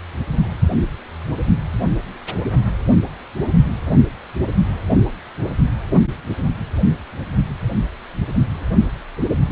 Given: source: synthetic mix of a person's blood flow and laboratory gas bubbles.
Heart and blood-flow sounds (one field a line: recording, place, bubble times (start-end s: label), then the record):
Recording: Doppler ultrasound of blood flow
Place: precordium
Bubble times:
no bubbles
From the record:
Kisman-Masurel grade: 000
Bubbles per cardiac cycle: 0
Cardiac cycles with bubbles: 0%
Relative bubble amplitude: no bubbles discernible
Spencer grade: 0 (complete lack of bubble signals)